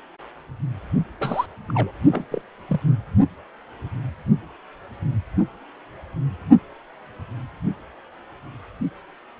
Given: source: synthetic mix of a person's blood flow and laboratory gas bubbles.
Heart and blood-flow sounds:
Doppler ultrasound of blood flow; precordium
1.19-1.46 s: bubbles
1.68-1.92 s: bubbles
2.11-2.25 s: bubbles
2.31-2.42 s: bubbles
2.67-2.81 s: bubbles
From the record:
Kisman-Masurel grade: 221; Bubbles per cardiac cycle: several, 3 to 8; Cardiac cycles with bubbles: 10 to 50%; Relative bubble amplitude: barely perceptible (0.100 to 0.250); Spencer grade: 2 (many but less than half of the cardiac periods contain bubble signals, singularly or in groups); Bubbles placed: only in the low amplitude regions of the cardiac cycle

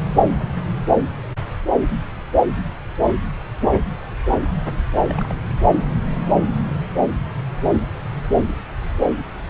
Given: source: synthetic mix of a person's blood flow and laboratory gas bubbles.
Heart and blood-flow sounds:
Doppler ultrasound of blood flow; subclavian vein
5.09-5.32 s: bubbles
From the record:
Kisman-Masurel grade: 111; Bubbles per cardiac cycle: 1 to 2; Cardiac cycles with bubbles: 1 to 10%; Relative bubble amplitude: barely perceptible (0.100 to 0.250); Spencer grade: 1 (occasional bubble signal discernible with the cardiac motion signal, with majority of cardiac periods free of bubbles); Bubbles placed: anywhere in the cardiac cycle

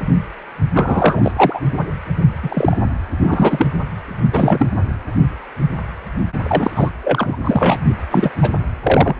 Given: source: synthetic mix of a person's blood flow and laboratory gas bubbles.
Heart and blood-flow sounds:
Doppler ultrasound of blood flow; precordium
0.73-1.31 s: bubbles
1.36-1.60 s: bubbles
2.43-2.76 s: bubbles
3.22-3.69 s: bubbles
4.33-4.67 s: bubbles
6.42-6.90 s: bubbles
7.03-7.36 s: bubbles
7.44-7.94 s: bubbles
8.10-8.30 s: bubbles
8.41-8.50 s: bubbles
8.83-9.16 s: bubbles
From the record:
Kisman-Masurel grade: 233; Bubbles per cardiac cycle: several, 3 to 8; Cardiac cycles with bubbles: 50 to 99%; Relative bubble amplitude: loud (0.450 to 0.775); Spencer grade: 3 (all of the cardiac periods contain showers or single bubble signals, but not dominating or overriding the cardiac motion signals); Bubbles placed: anywhere in the cardiac cycle

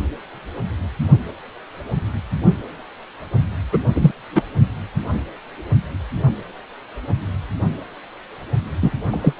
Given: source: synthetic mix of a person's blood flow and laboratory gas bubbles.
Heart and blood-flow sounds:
Doppler ultrasound of blood flow; precordium
3.72-3.78 s: bubbles
3.94-4.11 s: bubbles
4.35-4.43 s: bubbles
8.82-8.91 s: bubbles
9.11-9.33 s: bubbles
From the record:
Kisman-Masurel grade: 123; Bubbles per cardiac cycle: 1 to 2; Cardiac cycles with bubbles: 10 to 50%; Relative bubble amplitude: loud (0.450 to 0.775); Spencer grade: 2 (many but less than half of the cardiac periods contain bubble signals, singularly or in groups); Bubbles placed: anywhere in the cardiac cycle

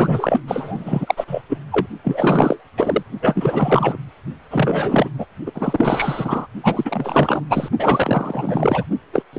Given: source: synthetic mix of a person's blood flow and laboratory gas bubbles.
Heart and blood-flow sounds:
Doppler ultrasound of blood flow; precordium
0.00-0.40 s: bubbles
0.47-1.42 s: bubbles
1.48-1.58 s: bubbles
1.71-1.87 s: bubbles
2.04-2.58 s: bubbles
2.77-3.03 s: bubbles
3.21-3.97 s: bubbles
4.50-5.08 s: bubbles
5.18-5.26 s: bubbles
5.46-5.51 s: bubbles
5.54-6.47 s: bubbles
6.63-7.41 s: bubbles
7.49-7.68 s: bubbles
7.78-8.84 s: bubbles
9.12-9.22 s: bubbles
9.33-9.39 s: bubbles
From the record:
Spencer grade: 4 (maximum detectable bubble signal sounding continuously throughout systole and diastole of every cardiac period, and overriding the amplitude of the normal cardiac signals); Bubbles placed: only in the low amplitude regions of the cardiac cycle

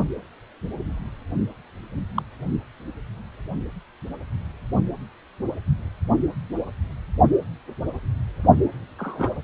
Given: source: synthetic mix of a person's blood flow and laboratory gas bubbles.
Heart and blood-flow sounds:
Doppler ultrasound of blood flow; precordium
2.15-2.23 s: bubbles
8.98-9.30 s: bubbles
From the record:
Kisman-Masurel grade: 122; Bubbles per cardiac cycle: 1 to 2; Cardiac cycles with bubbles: 10 to 50%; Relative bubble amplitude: moderate (0.250 to 0.450); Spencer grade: 2 (many but less than half of the cardiac periods contain bubble signals, singularly or in groups); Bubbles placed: only in the low amplitude regions of the cardiac cycle

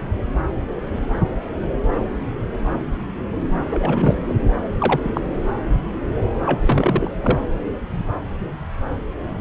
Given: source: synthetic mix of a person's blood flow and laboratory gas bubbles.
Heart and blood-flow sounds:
Doppler ultrasound of blood flow; subclavian vein
3.71-4.19 s: bubbles
4.27-4.33 s: bubbles
4.79-5.00 s: bubbles
5.04-5.21 s: bubbles
6.45-7.10 s: bubbles
7.22-7.40 s: bubbles
From the record:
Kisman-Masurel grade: 222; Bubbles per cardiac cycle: several, 3 to 8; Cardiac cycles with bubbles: 10 to 50%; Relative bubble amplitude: moderate (0.250 to 0.450); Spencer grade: 2 (many but less than half of the cardiac periods contain bubble signals, singularly or in groups); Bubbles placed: anywhere in the cardiac cycle

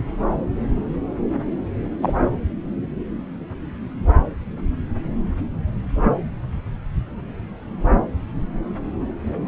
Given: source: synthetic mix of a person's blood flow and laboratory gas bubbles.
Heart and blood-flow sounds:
Doppler ultrasound of blood flow; subclavian vein
2.02-2.14 s: bubbles
From the record:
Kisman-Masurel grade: 123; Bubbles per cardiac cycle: 1 to 2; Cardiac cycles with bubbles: 10 to 50%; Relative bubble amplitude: loud (0.450 to 0.775); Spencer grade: 2 (many but less than half of the cardiac periods contain bubble signals, singularly or in groups); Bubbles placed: anywhere in the cardiac cycle

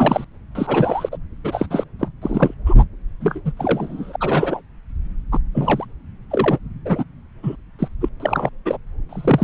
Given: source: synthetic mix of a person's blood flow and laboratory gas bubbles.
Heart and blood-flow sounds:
Doppler ultrasound of blood flow; subclavian vein
0.00-0.24 s: bubbles
0.55-1.09 s: bubbles
1.11-1.18 s: bubbles
1.44-1.66 s: bubbles
1.70-1.84 s: bubbles
1.99-2.08 s: bubbles
2.21-2.54 s: bubbles
2.65-2.75 s: bubbles
2.78-2.84 s: bubbles
3.20-3.41 s: bubbles
3.44-3.52 s: bubbles
3.57-4.16 s: bubbles
4.20-4.61 s: bubbles
5.31-5.38 s: bubbles
5.54-5.85 s: bubbles
6.30-6.59 s: bubbles
6.85-7.04 s: bubbles
7.43-7.56 s: bubbles
7.79-7.88 s: bubbles
8.01-8.09 s: bubbles
8.20-8.50 s: bubbles
8.65-8.78 s: bubbles
9.09-9.44 s: bubbles
From the record:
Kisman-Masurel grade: 233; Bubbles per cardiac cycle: several, 3 to 8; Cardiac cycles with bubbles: 50 to 99%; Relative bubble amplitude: loud (0.450 to 0.775); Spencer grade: 3 (all of the cardiac periods contain showers or single bubble signals, but not dominating or overriding the cardiac motion signals); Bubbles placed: anywhere in the cardiac cycle

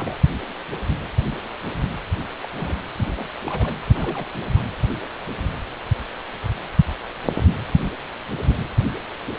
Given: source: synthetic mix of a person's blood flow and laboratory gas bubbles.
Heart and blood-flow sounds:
Doppler ultrasound of blood flow; precordium
0.00-0.18 s: bubbles
2.41-2.48 s: bubbles
2.56-2.75 s: bubbles
2.98-3.28 s: bubbles
3.44-3.77 s: bubbles
3.85-4.26 s: bubbles
4.56-4.60 s: bubbles
From the record:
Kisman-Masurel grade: 221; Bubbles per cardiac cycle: several, 3 to 8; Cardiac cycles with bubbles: 10 to 50%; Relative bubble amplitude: barely perceptible (0.100 to 0.250); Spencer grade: 2 (many but less than half of the cardiac periods contain bubble signals, singularly or in groups); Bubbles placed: anywhere in the cardiac cycle

